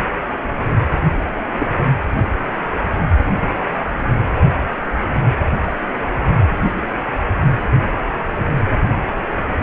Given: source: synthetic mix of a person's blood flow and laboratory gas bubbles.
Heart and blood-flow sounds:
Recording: Doppler ultrasound of blood flow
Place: precordium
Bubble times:
1.58-1.68 s: bubbles
From the record:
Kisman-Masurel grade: 112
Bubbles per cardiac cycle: 1 to 2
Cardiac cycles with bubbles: 1 to 10%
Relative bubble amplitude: moderate (0.250 to 0.450)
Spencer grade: 1 (occasional bubble signal discernible with the cardiac motion signal, with majority of cardiac periods free of bubbles)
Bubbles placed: anywhere in the cardiac cycle

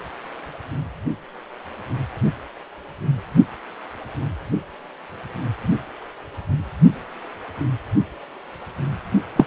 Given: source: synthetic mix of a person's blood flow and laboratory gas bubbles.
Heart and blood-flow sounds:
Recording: Doppler ultrasound of blood flow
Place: precordium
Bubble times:
9.36-9.45 s: bubbles
From the record:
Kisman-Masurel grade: 113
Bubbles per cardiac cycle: 1 to 2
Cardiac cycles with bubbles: 1 to 10%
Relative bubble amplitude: loud (0.450 to 0.775)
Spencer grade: 1 (occasional bubble signal discernible with the cardiac motion signal, with majority of cardiac periods free of bubbles)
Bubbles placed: only in the low amplitude regions of the cardiac cycle

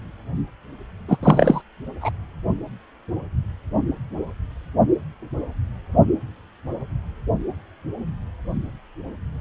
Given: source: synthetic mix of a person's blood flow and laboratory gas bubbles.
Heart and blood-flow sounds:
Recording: Doppler ultrasound of blood flow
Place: precordium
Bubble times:
1.08-1.17 s: bubbles
1.22-1.61 s: bubbles
2.01-2.12 s: bubbles
From the record:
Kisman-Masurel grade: 213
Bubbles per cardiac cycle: several, 3 to 8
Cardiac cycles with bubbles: 1 to 10%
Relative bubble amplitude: loud (0.450 to 0.775)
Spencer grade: 1 (occasional bubble signal discernible with the cardiac motion signal, with majority of cardiac periods free of bubbles)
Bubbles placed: only in the low amplitude regions of the cardiac cycle

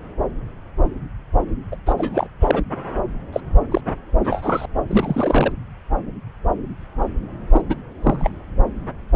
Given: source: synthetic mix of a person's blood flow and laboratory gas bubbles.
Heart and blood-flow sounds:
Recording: Doppler ultrasound of blood flow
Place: subclavian vein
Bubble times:
1.72-1.76 s: bubbles
1.86-1.94 s: bubbles
1.98-2.27 s: bubbles
2.40-2.61 s: bubbles
3.33-3.40 s: bubbles
3.71-3.81 s: bubbles
4.23-4.65 s: bubbles
4.88-5.52 s: bubbles
7.52-7.62 s: bubbles
7.69-7.76 s: bubbles
8.03-8.31 s: bubbles
From the record:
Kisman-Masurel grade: 232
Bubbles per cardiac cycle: several, 3 to 8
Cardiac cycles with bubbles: 50 to 99%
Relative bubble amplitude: moderate (0.250 to 0.450)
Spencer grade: 3 (all of the cardiac periods contain showers or single bubble signals, but not dominating or overriding the cardiac motion signals)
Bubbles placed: anywhere in the cardiac cycle

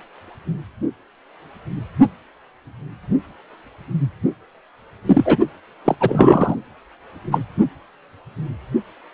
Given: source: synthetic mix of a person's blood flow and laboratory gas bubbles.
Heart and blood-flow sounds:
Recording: Doppler ultrasound of blood flow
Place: precordium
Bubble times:
5.05-5.38 s: bubbles
5.85-5.96 s: bubbles
6.00-6.55 s: bubbles
7.31-7.40 s: bubbles
From the record:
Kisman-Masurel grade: 223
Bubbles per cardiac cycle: several, 3 to 8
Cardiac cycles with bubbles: 10 to 50%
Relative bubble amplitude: loud (0.450 to 0.775)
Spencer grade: 2 (many but less than half of the cardiac periods contain bubble signals, singularly or in groups)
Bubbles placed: only in the low amplitude regions of the cardiac cycle

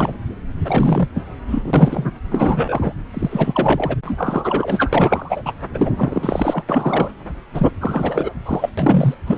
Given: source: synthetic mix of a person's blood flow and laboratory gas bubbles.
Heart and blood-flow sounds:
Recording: Doppler ultrasound of blood flow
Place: subclavian vein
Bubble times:
0.00-0.12 s: bubbles
0.65-1.07 s: bubbles
1.15-1.22 s: bubbles
1.47-2.05 s: bubbles
2.30-2.93 s: bubbles
3.13-3.95 s: bubbles
4.05-5.42 s: bubbles
5.45-5.53 s: bubbles
5.74-5.93 s: bubbles
5.97-6.64 s: bubbles
6.69-7.10 s: bubbles
7.54-7.70 s: bubbles
7.81-8.29 s: bubbles
8.46-8.70 s: bubbles
8.78-9.14 s: bubbles
9.26-9.38 s: bubbles
From the record:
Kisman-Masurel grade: 343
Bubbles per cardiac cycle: rolling drumbeat, 9 or more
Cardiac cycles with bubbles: 100%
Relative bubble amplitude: loud (0.450 to 0.775)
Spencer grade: 3 (all of the cardiac periods contain showers or single bubble signals, but not dominating or overriding the cardiac motion signals)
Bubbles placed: anywhere in the cardiac cycle

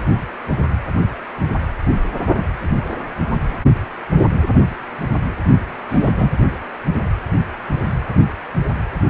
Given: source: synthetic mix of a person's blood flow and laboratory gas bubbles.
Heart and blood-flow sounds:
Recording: Doppler ultrasound of blood flow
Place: precordium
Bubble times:
5.88-6.09 s: bubbles
6.17-6.30 s: bubbles
From the record:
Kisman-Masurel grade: 213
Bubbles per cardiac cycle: several, 3 to 8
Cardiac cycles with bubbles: 1 to 10%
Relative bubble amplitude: loud (0.450 to 0.775)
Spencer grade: 1 (occasional bubble signal discernible with the cardiac motion signal, with majority of cardiac periods free of bubbles)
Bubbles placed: anywhere in the cardiac cycle

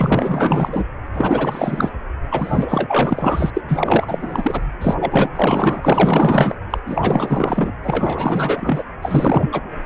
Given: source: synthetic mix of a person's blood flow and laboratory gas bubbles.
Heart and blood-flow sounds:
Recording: Doppler ultrasound of blood flow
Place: precordium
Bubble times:
0.00-0.84 s: bubbles
1.14-1.91 s: bubbles
2.31-3.50 s: bubbles
3.54-3.61 s: bubbles
3.69-4.69 s: bubbles
4.81-4.95 s: bubbles
5.00-5.29 s: bubbles
5.36-6.56 s: bubbles
6.70-6.79 s: bubbles
6.86-7.74 s: bubbles
7.83-8.84 s: bubbles
9.02-9.49 s: bubbles
9.52-9.61 s: bubbles
9.83-9.86 s: bubbles
From the record:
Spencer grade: 4 (maximum detectable bubble signal sounding continuously throughout systole and diastole of every cardiac period, and overriding the amplitude of the normal cardiac signals)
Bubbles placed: anywhere in the cardiac cycle

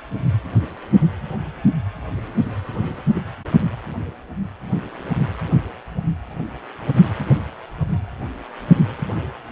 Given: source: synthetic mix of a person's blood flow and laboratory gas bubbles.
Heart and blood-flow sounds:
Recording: Doppler ultrasound of blood flow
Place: precordium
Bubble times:
3.15-3.22 s: bubbles
From the record:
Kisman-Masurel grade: 111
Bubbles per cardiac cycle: 1 to 2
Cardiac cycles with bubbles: 1 to 10%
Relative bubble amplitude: barely perceptible (0.100 to 0.250)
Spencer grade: 1 (occasional bubble signal discernible with the cardiac motion signal, with majority of cardiac periods free of bubbles)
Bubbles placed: anywhere in the cardiac cycle

